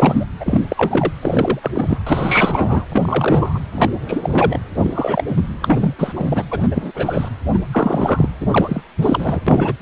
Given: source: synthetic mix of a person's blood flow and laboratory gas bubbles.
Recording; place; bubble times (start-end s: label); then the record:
Doppler ultrasound of blood flow; precordium
0.00-0.26 s: bubbles
0.40-0.62 s: bubbles
0.69-1.13 s: bubbles
1.22-1.59 s: bubbles
1.61-1.71 s: bubbles
1.74-1.98 s: bubbles
2.06-2.85 s: bubbles
2.90-3.65 s: bubbles
3.72-3.89 s: bubbles
4.06-4.59 s: bubbles
4.83-5.24 s: bubbles
5.28-5.42 s: bubbles
5.62-5.93 s: bubbles
5.98-6.12 s: bubbles
6.16-6.43 s: bubbles
6.50-6.68 s: bubbles
6.71-6.92 s: bubbles
6.94-7.29 s: bubbles
7.54-7.58 s: bubbles
7.72-8.29 s: bubbles
8.40-8.81 s: bubbles
9.03-9.41 s: bubbles
9.46-9.73 s: bubbles
9.79-9.82 s: bubbles
From the record:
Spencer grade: 3 (all of the cardiac periods contain showers or single bubble signals, but not dominating or overriding the cardiac motion signals); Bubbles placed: anywhere in the cardiac cycle